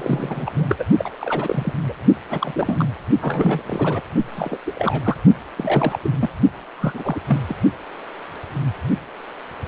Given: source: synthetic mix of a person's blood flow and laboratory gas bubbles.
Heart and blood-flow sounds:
Doppler ultrasound of blood flow; precordium
0.00-0.76 s: bubbles
0.78-0.85 s: bubbles
0.97-1.09 s: bubbles
1.21-1.73 s: bubbles
1.88-1.93 s: bubbles
2.30-2.88 s: bubbles
3.21-3.62 s: bubbles
3.66-4.01 s: bubbles
4.36-4.58 s: bubbles
4.66-4.73 s: bubbles
4.75-5.17 s: bubbles
5.57-5.99 s: bubbles
6.04-6.11 s: bubbles
6.20-6.29 s: bubbles
6.78-7.20 s: bubbles
7.27-7.39 s: bubbles
7.49-7.55 s: bubbles
From the record:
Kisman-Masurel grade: 332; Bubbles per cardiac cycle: rolling drumbeat, 9 or more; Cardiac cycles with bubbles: 50 to 99%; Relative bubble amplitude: moderate (0.250 to 0.450); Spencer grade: 3 (all of the cardiac periods contain showers or single bubble signals, but not dominating or overriding the cardiac motion signals); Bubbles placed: only in the low amplitude regions of the cardiac cycle

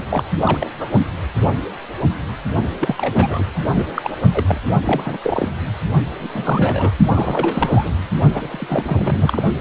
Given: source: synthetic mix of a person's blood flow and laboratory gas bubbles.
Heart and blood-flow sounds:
Doppler ultrasound of blood flow; precordium
0.10-0.24 s: bubbles
0.42-0.70 s: bubbles
0.79-0.89 s: bubbles
2.79-3.44 s: bubbles
3.75-3.87 s: bubbles
3.94-4.21 s: bubbles
4.33-4.44 s: bubbles
4.46-4.57 s: bubbles
4.84-5.17 s: bubbles
5.23-5.50 s: bubbles
6.20-6.31 s: bubbles
6.35-6.92 s: bubbles
7.09-7.91 s: bubbles
8.34-9.41 s: bubbles
From the record:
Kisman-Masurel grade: 332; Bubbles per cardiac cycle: rolling drumbeat, 9 or more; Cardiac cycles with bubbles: 50 to 99%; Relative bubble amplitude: moderate (0.250 to 0.450); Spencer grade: 3 (all of the cardiac periods contain showers or single bubble signals, but not dominating or overriding the cardiac motion signals); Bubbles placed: only in the low amplitude regions of the cardiac cycle

